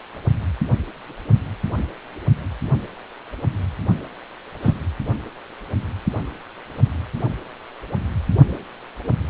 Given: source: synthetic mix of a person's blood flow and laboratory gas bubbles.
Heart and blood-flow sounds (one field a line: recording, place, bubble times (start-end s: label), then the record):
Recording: Doppler ultrasound of blood flow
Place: precordium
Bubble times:
4.62-4.76 s: bubbles
From the record:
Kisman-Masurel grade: 113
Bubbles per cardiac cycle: 1 to 2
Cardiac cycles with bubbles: 1 to 10%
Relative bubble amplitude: loud (0.450 to 0.775)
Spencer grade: 1 (occasional bubble signal discernible with the cardiac motion signal, with majority of cardiac periods free of bubbles)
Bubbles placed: anywhere in the cardiac cycle